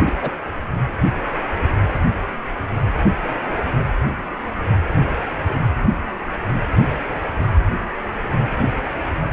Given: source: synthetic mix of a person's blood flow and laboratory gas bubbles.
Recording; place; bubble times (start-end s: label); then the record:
Doppler ultrasound of blood flow; precordium
0.05-0.12 s: bubbles
0.17-0.29 s: bubbles
From the record:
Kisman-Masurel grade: 212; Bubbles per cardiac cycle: several, 3 to 8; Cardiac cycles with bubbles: 1 to 10%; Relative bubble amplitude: moderate (0.250 to 0.450); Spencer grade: 1 (occasional bubble signal discernible with the cardiac motion signal, with majority of cardiac periods free of bubbles); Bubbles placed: anywhere in the cardiac cycle